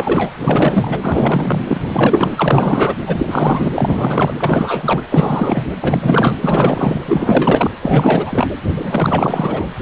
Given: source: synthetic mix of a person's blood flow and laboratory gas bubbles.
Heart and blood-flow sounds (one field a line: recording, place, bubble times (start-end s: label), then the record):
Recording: Doppler ultrasound of blood flow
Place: precordium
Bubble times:
0.00-0.31 s: bubbles
0.41-1.62 s: bubbles
1.68-1.79 s: bubbles
1.83-2.34 s: bubbles
2.36-2.96 s: bubbles
3.06-4.33 s: bubbles
4.39-5.03 s: bubbles
5.09-5.72 s: bubbles
5.81-6.38 s: bubbles
6.41-7.00 s: bubbles
7.05-7.71 s: bubbles
7.82-8.47 s: bubbles
8.76-9.69 s: bubbles
From the record:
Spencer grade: 4 (maximum detectable bubble signal sounding continuously throughout systole and diastole of every cardiac period, and overriding the amplitude of the normal cardiac signals)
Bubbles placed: anywhere in the cardiac cycle